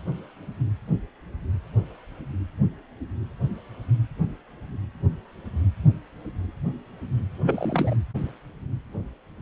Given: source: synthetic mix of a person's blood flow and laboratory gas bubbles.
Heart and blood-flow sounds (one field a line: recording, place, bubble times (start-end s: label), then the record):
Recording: Doppler ultrasound of blood flow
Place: precordium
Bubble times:
7.43-7.96 s: bubbles
From the record:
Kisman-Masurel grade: 211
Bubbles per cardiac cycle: several, 3 to 8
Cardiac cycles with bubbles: 1 to 10%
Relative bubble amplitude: barely perceptible (0.100 to 0.250)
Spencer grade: 1 (occasional bubble signal discernible with the cardiac motion signal, with majority of cardiac periods free of bubbles)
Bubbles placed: anywhere in the cardiac cycle